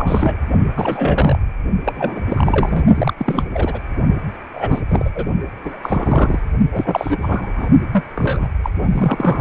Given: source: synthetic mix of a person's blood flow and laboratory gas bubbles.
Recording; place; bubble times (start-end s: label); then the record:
Doppler ultrasound of blood flow; precordium
0.00-0.36 s: bubbles
0.76-1.39 s: bubbles
1.84-2.21 s: bubbles
2.27-2.85 s: bubbles
2.94-3.13 s: bubbles
3.17-3.44 s: bubbles
3.53-3.79 s: bubbles
4.54-4.81 s: bubbles
4.88-5.10 s: bubbles
5.14-5.25 s: bubbles
5.64-5.77 s: bubbles
5.83-6.39 s: bubbles
6.71-7.17 s: bubbles
7.21-7.70 s: bubbles
7.92-8.03 s: bubbles
8.15-8.47 s: bubbles
8.63-8.70 s: bubbles
8.79-9.41 s: bubbles
From the record:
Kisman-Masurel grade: 342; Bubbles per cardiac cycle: rolling drumbeat, 9 or more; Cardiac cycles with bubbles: 100%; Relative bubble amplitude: moderate (0.250 to 0.450); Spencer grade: 3 (all of the cardiac periods contain showers or single bubble signals, but not dominating or overriding the cardiac motion signals); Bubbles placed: only in the low amplitude regions of the cardiac cycle